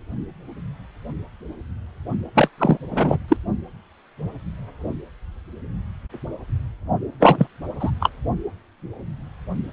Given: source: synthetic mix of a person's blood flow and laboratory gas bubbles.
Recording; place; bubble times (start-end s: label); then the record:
Doppler ultrasound of blood flow; precordium
2.34-2.48 s: bubbles
2.58-2.77 s: bubbles
2.90-3.17 s: bubbles
3.28-3.36 s: bubbles
7.20-7.47 s: bubbles
7.79-7.91 s: bubbles
8.00-8.10 s: bubbles
From the record:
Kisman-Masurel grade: 223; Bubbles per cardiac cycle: several, 3 to 8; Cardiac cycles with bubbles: 10 to 50%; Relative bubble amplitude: loud (0.450 to 0.775); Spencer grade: 2 (many but less than half of the cardiac periods contain bubble signals, singularly or in groups); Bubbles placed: only in the low amplitude regions of the cardiac cycle